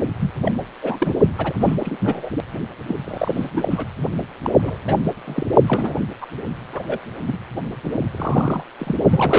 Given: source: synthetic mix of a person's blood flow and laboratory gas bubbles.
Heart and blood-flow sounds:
Doppler ultrasound of blood flow; precordium
0.19-0.32 s: bubbles
0.45-0.52 s: bubbles
0.82-1.14 s: bubbles
1.38-1.53 s: bubbles
1.59-1.76 s: bubbles
1.80-1.97 s: bubbles
1.99-2.29 s: bubbles
2.88-2.95 s: bubbles
3.04-3.86 s: bubbles
4.44-4.50 s: bubbles
4.62-4.77 s: bubbles
4.87-4.95 s: bubbles
5.25-5.46 s: bubbles
5.67-5.94 s: bubbles
6.21-6.27 s: bubbles
6.73-6.83 s: bubbles
6.87-6.99 s: bubbles
7.27-7.39 s: bubbles
7.83-7.97 s: bubbles
8.13-8.62 s: bubbles
8.79-8.95 s: bubbles
9.10-9.38 s: bubbles
From the record:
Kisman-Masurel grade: 232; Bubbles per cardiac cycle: several, 3 to 8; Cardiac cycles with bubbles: 50 to 99%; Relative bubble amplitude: moderate (0.250 to 0.450); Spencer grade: 3 (all of the cardiac periods contain showers or single bubble signals, but not dominating or overriding the cardiac motion signals); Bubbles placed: only in the low amplitude regions of the cardiac cycle

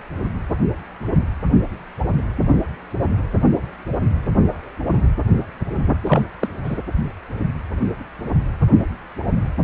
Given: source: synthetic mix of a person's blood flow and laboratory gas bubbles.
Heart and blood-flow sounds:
Doppler ultrasound of blood flow; precordium
6.06-6.23 s: bubbles
6.40-6.48 s: bubbles
6.64-6.79 s: bubbles
From the record:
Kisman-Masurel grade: 212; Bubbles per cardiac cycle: several, 3 to 8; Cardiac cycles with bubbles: 1 to 10%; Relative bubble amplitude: moderate (0.250 to 0.450); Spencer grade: 1 (occasional bubble signal discernible with the cardiac motion signal, with majority of cardiac periods free of bubbles); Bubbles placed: anywhere in the cardiac cycle

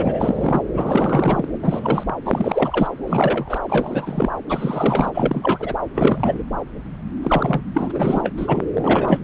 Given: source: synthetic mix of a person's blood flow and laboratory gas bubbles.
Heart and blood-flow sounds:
Doppler ultrasound of blood flow; subclavian vein
0.00-0.62 s: bubbles
0.75-1.45 s: bubbles
1.62-2.03 s: bubbles
2.25-2.88 s: bubbles
3.05-3.58 s: bubbles
3.68-4.30 s: bubbles
4.49-5.11 s: bubbles
5.13-5.74 s: bubbles
5.95-6.43 s: bubbles
7.22-7.62 s: bubbles
7.74-8.31 s: bubbles
8.37-8.67 s: bubbles
8.75-9.19 s: bubbles
From the record:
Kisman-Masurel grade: 342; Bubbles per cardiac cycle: rolling drumbeat, 9 or more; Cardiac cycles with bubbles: 100%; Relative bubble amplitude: moderate (0.250 to 0.450); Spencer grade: 3 (all of the cardiac periods contain showers or single bubble signals, but not dominating or overriding the cardiac motion signals); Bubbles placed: anywhere in the cardiac cycle

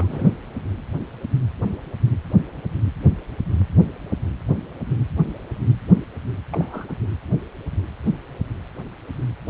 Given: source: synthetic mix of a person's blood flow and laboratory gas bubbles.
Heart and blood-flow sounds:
Doppler ultrasound of blood flow; precordium
0.00-0.32 s: bubbles
6.52-6.96 s: bubbles
From the record:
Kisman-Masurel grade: 221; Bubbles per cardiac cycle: several, 3 to 8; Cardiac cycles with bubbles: 10 to 50%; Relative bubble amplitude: barely perceptible (0.100 to 0.250); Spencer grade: 2 (many but less than half of the cardiac periods contain bubble signals, singularly or in groups); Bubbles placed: anywhere in the cardiac cycle

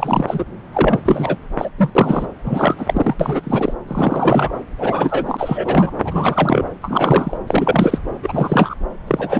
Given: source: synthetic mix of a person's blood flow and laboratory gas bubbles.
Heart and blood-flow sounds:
Doppler ultrasound of blood flow; subclavian vein
0.00-0.44 s: bubbles
0.73-1.00 s: bubbles
1.05-1.36 s: bubbles
1.58-1.70 s: bubbles
1.78-1.93 s: bubbles
1.95-2.27 s: bubbles
2.44-2.75 s: bubbles
2.77-3.15 s: bubbles
3.20-3.41 s: bubbles
3.43-3.73 s: bubbles
3.87-4.51 s: bubbles
4.77-5.91 s: bubbles
6.04-6.65 s: bubbles
6.81-7.37 s: bubbles
7.46-7.98 s: bubbles
8.22-8.75 s: bubbles
9.07-9.40 s: bubbles
From the record:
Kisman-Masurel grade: 343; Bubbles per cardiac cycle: rolling drumbeat, 9 or more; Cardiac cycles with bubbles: 100%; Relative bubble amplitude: loud (0.450 to 0.775); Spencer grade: 3 (all of the cardiac periods contain showers or single bubble signals, but not dominating or overriding the cardiac motion signals); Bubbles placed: anywhere in the cardiac cycle

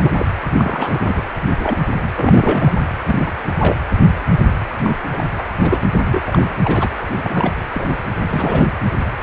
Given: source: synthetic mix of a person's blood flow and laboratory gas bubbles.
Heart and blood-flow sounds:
Doppler ultrasound of blood flow; precordium
0.00-0.26 s: bubbles
0.57-1.21 s: bubbles
1.56-1.77 s: bubbles
2.16-2.72 s: bubbles
3.06-3.32 s: bubbles
3.58-3.76 s: bubbles
4.83-4.98 s: bubbles
5.12-5.31 s: bubbles
5.38-5.43 s: bubbles
5.58-5.84 s: bubbles
6.06-6.21 s: bubbles
6.27-6.47 s: bubbles
6.64-6.89 s: bubbles
7.18-7.59 s: bubbles
7.74-7.85 s: bubbles
8.29-8.67 s: bubbles
9.20-9.23 s: bubbles
From the record:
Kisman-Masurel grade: 242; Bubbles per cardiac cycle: several, 3 to 8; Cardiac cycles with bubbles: 100%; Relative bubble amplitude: moderate (0.250 to 0.450); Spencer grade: 3 (all of the cardiac periods contain showers or single bubble signals, but not dominating or overriding the cardiac motion signals); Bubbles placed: anywhere in the cardiac cycle

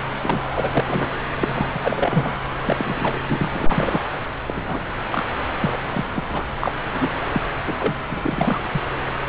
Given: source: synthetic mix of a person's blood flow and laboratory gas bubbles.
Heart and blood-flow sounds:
Doppler ultrasound of blood flow; subclavian vein
0.23-0.42 s: bubbles
0.55-0.69 s: bubbles
0.72-0.84 s: bubbles
0.87-1.15 s: bubbles
1.38-1.69 s: bubbles
1.75-2.36 s: bubbles
2.63-3.20 s: bubbles
3.29-4.03 s: bubbles
4.46-4.81 s: bubbles
5.11-5.26 s: bubbles
5.61-5.79 s: bubbles
5.92-6.04 s: bubbles
6.12-6.23 s: bubbles
6.28-6.48 s: bubbles
6.61-6.72 s: bubbles
6.93-7.09 s: bubbles
7.32-7.41 s: bubbles
7.66-7.76 s: bubbles
7.79-7.95 s: bubbles
8.11-8.61 s: bubbles
8.71-8.82 s: bubbles
9.26-9.29 s: bubbles
From the record:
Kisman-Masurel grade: 242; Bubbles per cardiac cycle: several, 3 to 8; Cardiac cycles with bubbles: 100%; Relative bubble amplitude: moderate (0.250 to 0.450); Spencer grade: 3 (all of the cardiac periods contain showers or single bubble signals, but not dominating or overriding the cardiac motion signals); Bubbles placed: anywhere in the cardiac cycle

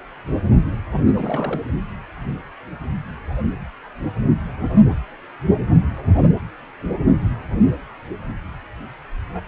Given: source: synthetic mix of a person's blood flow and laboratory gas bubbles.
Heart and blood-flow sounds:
Doppler ultrasound of blood flow; precordium
1.15-1.61 s: bubbles
From the record:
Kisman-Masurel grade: 211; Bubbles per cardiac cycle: several, 3 to 8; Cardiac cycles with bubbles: 1 to 10%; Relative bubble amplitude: barely perceptible (0.100 to 0.250); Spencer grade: 1 (occasional bubble signal discernible with the cardiac motion signal, with majority of cardiac periods free of bubbles); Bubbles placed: anywhere in the cardiac cycle

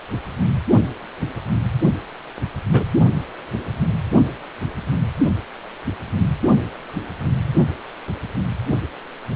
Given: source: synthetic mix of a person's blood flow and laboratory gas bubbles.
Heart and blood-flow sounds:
Doppler ultrasound of blood flow; precordium
2.73-2.83 s: bubbles
From the record:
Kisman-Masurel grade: 113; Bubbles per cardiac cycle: 1 to 2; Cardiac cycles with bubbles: 1 to 10%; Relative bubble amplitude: loud (0.450 to 0.775); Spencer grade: 1 (occasional bubble signal discernible with the cardiac motion signal, with majority of cardiac periods free of bubbles); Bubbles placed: only in the low amplitude regions of the cardiac cycle

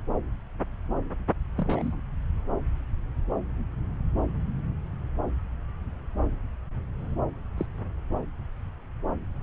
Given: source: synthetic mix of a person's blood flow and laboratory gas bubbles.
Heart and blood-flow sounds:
Doppler ultrasound of blood flow; subclavian vein
1.56-2.02 s: bubbles
7.57-7.66 s: bubbles
From the record:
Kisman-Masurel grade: 121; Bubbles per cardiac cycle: 1 to 2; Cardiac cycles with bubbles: 10 to 50%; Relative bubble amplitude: barely perceptible (0.100 to 0.250); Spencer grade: 2 (many but less than half of the cardiac periods contain bubble signals, singularly or in groups); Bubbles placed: anywhere in the cardiac cycle

